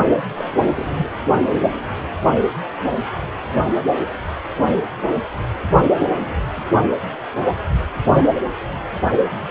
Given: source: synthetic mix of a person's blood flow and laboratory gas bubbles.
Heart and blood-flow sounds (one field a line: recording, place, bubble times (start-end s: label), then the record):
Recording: Doppler ultrasound of blood flow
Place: precordium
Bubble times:
0.37-0.45 s: bubbles
0.61-0.92 s: bubbles
0.98-1.07 s: bubbles
6.08-6.35 s: bubbles
6.57-6.64 s: bubbles
From the record:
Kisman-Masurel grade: 221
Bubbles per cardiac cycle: several, 3 to 8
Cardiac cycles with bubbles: 10 to 50%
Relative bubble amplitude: barely perceptible (0.100 to 0.250)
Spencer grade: 2 (many but less than half of the cardiac periods contain bubble signals, singularly or in groups)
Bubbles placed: only in the low amplitude regions of the cardiac cycle